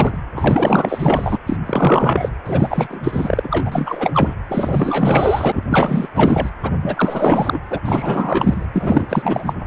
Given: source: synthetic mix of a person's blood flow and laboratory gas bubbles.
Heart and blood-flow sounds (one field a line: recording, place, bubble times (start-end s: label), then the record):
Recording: Doppler ultrasound of blood flow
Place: precordium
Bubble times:
0.00-0.18 s: bubbles
0.35-1.39 s: bubbles
1.46-1.57 s: bubbles
1.66-2.29 s: bubbles
2.46-4.11 s: bubbles
4.13-4.36 s: bubbles
4.48-5.63 s: bubbles
5.70-6.08 s: bubbles
6.14-6.49 s: bubbles
6.61-7.59 s: bubbles
7.70-7.79 s: bubbles
7.85-8.67 s: bubbles
8.73-9.54 s: bubbles
From the record:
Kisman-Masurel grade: 444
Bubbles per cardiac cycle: continuous sound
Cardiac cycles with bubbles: 100%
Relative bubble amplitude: maximal (0.775 to 0.999)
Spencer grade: 4 (maximum detectable bubble signal sounding continuously throughout systole and diastole of every cardiac period, and overriding the amplitude of the normal cardiac signals)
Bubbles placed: anywhere in the cardiac cycle